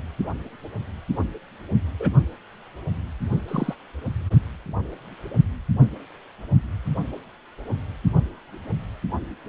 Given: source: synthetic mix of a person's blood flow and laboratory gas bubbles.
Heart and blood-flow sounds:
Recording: Doppler ultrasound of blood flow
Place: precordium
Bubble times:
1.99-2.10 s: bubbles
3.48-3.75 s: bubbles
From the record:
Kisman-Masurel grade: 121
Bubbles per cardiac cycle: 1 to 2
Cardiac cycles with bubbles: 10 to 50%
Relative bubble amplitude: barely perceptible (0.100 to 0.250)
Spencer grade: 2 (many but less than half of the cardiac periods contain bubble signals, singularly or in groups)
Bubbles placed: only in the low amplitude regions of the cardiac cycle

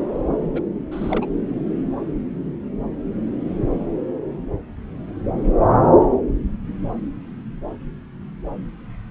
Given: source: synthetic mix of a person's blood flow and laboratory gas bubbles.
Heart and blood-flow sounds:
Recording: Doppler ultrasound of blood flow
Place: subclavian vein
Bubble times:
0.52-0.62 s: bubbles
0.92-1.26 s: bubbles
From the record:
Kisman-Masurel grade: 211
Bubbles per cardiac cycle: several, 3 to 8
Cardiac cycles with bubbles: 1 to 10%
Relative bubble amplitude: barely perceptible (0.100 to 0.250)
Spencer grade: 1 (occasional bubble signal discernible with the cardiac motion signal, with majority of cardiac periods free of bubbles)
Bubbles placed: anywhere in the cardiac cycle

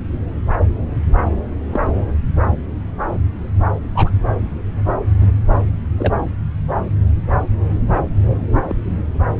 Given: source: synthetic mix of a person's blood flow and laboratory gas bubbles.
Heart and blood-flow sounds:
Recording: Doppler ultrasound of blood flow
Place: subclavian vein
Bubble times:
1.71-1.92 s: bubbles
3.95-4.10 s: bubbles
5.21-5.27 s: bubbles
5.98-6.13 s: bubbles
8.63-8.75 s: bubbles
From the record:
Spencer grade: 2 (many but less than half of the cardiac periods contain bubble signals, singularly or in groups)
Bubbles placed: anywhere in the cardiac cycle

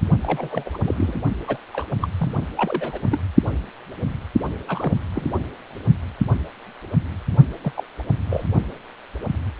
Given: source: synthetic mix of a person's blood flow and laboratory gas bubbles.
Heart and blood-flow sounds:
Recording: Doppler ultrasound of blood flow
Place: precordium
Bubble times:
0.22-0.69 s: bubbles
0.74-0.79 s: bubbles
0.84-1.19 s: bubbles
1.47-1.57 s: bubbles
1.73-1.85 s: bubbles
2.02-2.08 s: bubbles
2.18-2.47 s: bubbles
2.57-3.00 s: bubbles
3.12-3.19 s: bubbles
4.67-4.93 s: bubbles
5.14-5.26 s: bubbles
7.64-7.72 s: bubbles
7.76-7.83 s: bubbles
8.29-8.45 s: bubbles
From the record:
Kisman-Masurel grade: 221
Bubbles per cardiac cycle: several, 3 to 8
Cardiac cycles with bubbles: 10 to 50%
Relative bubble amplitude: barely perceptible (0.100 to 0.250)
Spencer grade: 2 (many but less than half of the cardiac periods contain bubble signals, singularly or in groups)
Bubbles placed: only in the low amplitude regions of the cardiac cycle

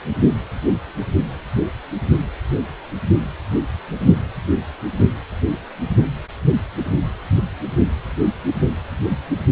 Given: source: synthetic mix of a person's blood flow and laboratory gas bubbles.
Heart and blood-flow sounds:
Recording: Doppler ultrasound of blood flow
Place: precordium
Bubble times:
no bubbles
From the record:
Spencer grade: 0 (complete lack of bubble signals)

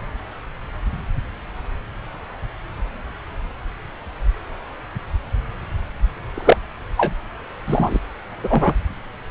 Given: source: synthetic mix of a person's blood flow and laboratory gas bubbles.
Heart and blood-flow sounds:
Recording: Doppler ultrasound of blood flow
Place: subclavian vein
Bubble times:
6.34-6.58 s: bubbles
6.97-7.14 s: bubbles
7.67-7.99 s: bubbles
8.43-8.73 s: bubbles
From the record:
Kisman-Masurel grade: 223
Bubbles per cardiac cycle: several, 3 to 8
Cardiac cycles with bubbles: 10 to 50%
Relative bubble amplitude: loud (0.450 to 0.775)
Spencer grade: 2 (many but less than half of the cardiac periods contain bubble signals, singularly or in groups)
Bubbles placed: anywhere in the cardiac cycle

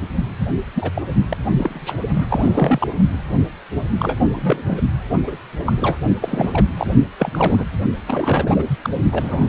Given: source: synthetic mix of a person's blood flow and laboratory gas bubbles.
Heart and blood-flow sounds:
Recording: Doppler ultrasound of blood flow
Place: precordium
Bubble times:
0.75-0.91 s: bubbles
0.94-1.02 s: bubbles
1.29-1.37 s: bubbles
1.58-1.94 s: bubbles
2.13-2.26 s: bubbles
2.29-2.88 s: bubbles
3.99-4.17 s: bubbles
4.33-4.81 s: bubbles
5.27-5.36 s: bubbles
5.65-5.98 s: bubbles
6.21-6.66 s: bubbles
6.77-6.91 s: bubbles
7.18-7.64 s: bubbles
8.06-8.64 s: bubbles
8.83-8.90 s: bubbles
9.11-9.49 s: bubbles
From the record:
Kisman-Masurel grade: 242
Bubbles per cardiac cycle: several, 3 to 8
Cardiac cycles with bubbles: 100%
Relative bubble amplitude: moderate (0.250 to 0.450)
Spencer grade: 3 (all of the cardiac periods contain showers or single bubble signals, but not dominating or overriding the cardiac motion signals)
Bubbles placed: only in the low amplitude regions of the cardiac cycle

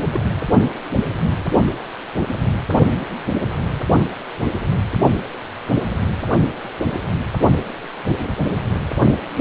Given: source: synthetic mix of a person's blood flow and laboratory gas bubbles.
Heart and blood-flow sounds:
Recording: Doppler ultrasound of blood flow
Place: precordium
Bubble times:
0.11-0.20 s: bubbles
1.28-1.34 s: bubbles
From the record:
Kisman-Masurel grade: 112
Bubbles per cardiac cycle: 1 to 2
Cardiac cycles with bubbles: 1 to 10%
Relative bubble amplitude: moderate (0.250 to 0.450)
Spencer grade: 1 (occasional bubble signal discernible with the cardiac motion signal, with majority of cardiac periods free of bubbles)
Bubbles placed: only in the low amplitude regions of the cardiac cycle

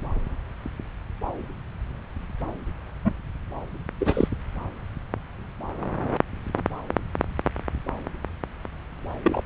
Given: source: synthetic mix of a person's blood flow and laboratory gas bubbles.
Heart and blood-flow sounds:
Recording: Doppler ultrasound of blood flow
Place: subclavian vein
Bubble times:
3.04-3.11 s: bubbles
4.00-4.28 s: bubbles
9.23-9.45 s: bubbles
From the record:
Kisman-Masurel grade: 222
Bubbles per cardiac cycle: several, 3 to 8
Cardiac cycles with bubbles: 10 to 50%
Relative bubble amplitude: moderate (0.250 to 0.450)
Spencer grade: 2 (many but less than half of the cardiac periods contain bubble signals, singularly or in groups)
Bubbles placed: anywhere in the cardiac cycle

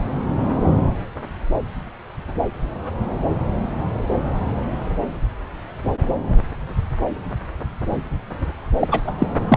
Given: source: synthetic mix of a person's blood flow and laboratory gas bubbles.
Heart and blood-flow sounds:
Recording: Doppler ultrasound of blood flow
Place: subclavian vein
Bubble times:
8.80-8.88 s: bubbles
8.91-9.01 s: bubbles
9.07-9.12 s: bubbles
9.19-9.27 s: bubbles
9.48-9.57 s: bubbles
From the record:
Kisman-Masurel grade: 213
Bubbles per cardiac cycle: several, 3 to 8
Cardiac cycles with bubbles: 1 to 10%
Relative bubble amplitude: loud (0.450 to 0.775)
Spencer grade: 1 (occasional bubble signal discernible with the cardiac motion signal, with majority of cardiac periods free of bubbles)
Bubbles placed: anywhere in the cardiac cycle

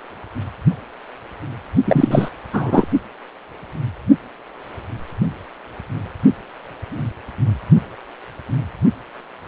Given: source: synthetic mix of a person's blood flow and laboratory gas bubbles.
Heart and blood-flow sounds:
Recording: Doppler ultrasound of blood flow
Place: precordium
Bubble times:
1.85-2.29 s: bubbles
2.52-2.88 s: bubbles
From the record:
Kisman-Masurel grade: 213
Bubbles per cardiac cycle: several, 3 to 8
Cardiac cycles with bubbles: 1 to 10%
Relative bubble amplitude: loud (0.450 to 0.775)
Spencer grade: 1 (occasional bubble signal discernible with the cardiac motion signal, with majority of cardiac periods free of bubbles)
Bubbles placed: only in the low amplitude regions of the cardiac cycle

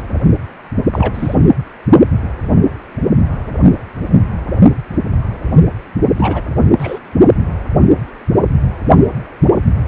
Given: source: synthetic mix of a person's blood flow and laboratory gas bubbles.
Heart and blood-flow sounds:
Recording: Doppler ultrasound of blood flow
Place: precordium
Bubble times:
0.92-1.35 s: bubbles
6.17-6.42 s: bubbles
6.79-6.99 s: bubbles
From the record:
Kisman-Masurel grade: 222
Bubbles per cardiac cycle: several, 3 to 8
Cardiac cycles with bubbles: 10 to 50%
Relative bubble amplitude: moderate (0.250 to 0.450)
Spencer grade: 2 (many but less than half of the cardiac periods contain bubble signals, singularly or in groups)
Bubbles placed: only in the low amplitude regions of the cardiac cycle

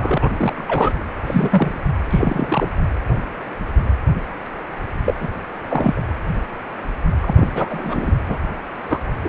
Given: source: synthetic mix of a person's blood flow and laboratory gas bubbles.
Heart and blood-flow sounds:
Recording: Doppler ultrasound of blood flow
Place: precordium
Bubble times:
0.00-0.65 s: bubbles
0.68-0.94 s: bubbles
1.26-1.80 s: bubbles
2.10-2.68 s: bubbles
5.06-5.14 s: bubbles
5.19-5.29 s: bubbles
5.69-6.02 s: bubbles
7.21-8.12 s: bubbles
8.28-8.38 s: bubbles
8.83-9.11 s: bubbles
9.23-9.29 s: bubbles
From the record:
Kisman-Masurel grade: 233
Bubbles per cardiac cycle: several, 3 to 8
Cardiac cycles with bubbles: 50 to 99%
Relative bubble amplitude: loud (0.450 to 0.775)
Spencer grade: 3 (all of the cardiac periods contain showers or single bubble signals, but not dominating or overriding the cardiac motion signals)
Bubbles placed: anywhere in the cardiac cycle

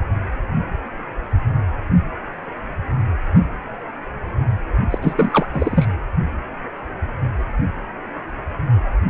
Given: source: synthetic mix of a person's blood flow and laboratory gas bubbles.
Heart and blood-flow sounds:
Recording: Doppler ultrasound of blood flow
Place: precordium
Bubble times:
4.91-4.98 s: bubbles
5.01-5.46 s: bubbles
5.53-5.88 s: bubbles
From the record:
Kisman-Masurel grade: 213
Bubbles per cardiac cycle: several, 3 to 8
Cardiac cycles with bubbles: 1 to 10%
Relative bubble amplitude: loud (0.450 to 0.775)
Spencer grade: 1 (occasional bubble signal discernible with the cardiac motion signal, with majority of cardiac periods free of bubbles)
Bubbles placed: only in the low amplitude regions of the cardiac cycle

